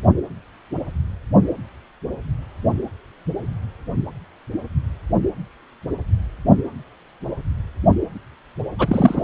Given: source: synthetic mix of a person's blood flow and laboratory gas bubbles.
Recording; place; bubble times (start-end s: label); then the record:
Doppler ultrasound of blood flow; precordium
8.78-9.23 s: bubbles
From the record:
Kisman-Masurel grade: 213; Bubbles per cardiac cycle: several, 3 to 8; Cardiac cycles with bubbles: 1 to 10%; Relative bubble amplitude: loud (0.450 to 0.775); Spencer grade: 1 (occasional bubble signal discernible with the cardiac motion signal, with majority of cardiac periods free of bubbles); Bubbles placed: anywhere in the cardiac cycle